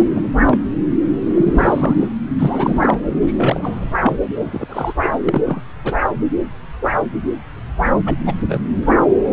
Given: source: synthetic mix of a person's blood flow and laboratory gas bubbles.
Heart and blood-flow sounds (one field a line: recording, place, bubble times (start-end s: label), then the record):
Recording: Doppler ultrasound of blood flow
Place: subclavian vein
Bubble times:
0.00-0.04 s: bubbles
0.15-0.28 s: bubbles
0.49-0.57 s: bubbles
1.26-2.11 s: bubbles
2.38-2.98 s: bubbles
3.21-3.92 s: bubbles
3.97-4.16 s: bubbles
4.35-4.67 s: bubbles
4.70-4.93 s: bubbles
5.03-5.08 s: bubbles
5.24-5.42 s: bubbles
5.46-5.62 s: bubbles
5.85-5.95 s: bubbles
8.05-8.14 s: bubbles
8.26-8.34 s: bubbles
8.48-8.60 s: bubbles
8.86-8.93 s: bubbles
From the record:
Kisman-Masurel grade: 232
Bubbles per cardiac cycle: several, 3 to 8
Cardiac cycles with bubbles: 50 to 99%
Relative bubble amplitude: moderate (0.250 to 0.450)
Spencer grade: 3 (all of the cardiac periods contain showers or single bubble signals, but not dominating or overriding the cardiac motion signals)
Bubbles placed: anywhere in the cardiac cycle